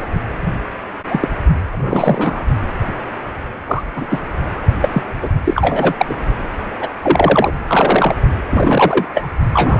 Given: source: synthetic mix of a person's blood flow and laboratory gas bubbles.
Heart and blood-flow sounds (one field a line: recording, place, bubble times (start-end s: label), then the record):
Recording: Doppler ultrasound of blood flow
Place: precordium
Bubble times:
0.00-0.05 s: bubbles
1.09-1.29 s: bubbles
1.72-2.44 s: bubbles
3.67-3.82 s: bubbles
3.96-4.05 s: bubbles
4.09-4.23 s: bubbles
4.82-5.03 s: bubbles
5.22-5.29 s: bubbles
5.44-5.94 s: bubbles
5.97-6.06 s: bubbles
6.09-6.14 s: bubbles
6.79-6.88 s: bubbles
7.02-7.52 s: bubbles
7.67-8.15 s: bubbles
8.49-9.06 s: bubbles
9.14-9.30 s: bubbles
9.54-9.80 s: bubbles
From the record:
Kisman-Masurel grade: 243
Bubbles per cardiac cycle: several, 3 to 8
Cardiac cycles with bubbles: 100%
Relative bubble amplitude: loud (0.450 to 0.775)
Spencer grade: 3 (all of the cardiac periods contain showers or single bubble signals, but not dominating or overriding the cardiac motion signals)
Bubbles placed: anywhere in the cardiac cycle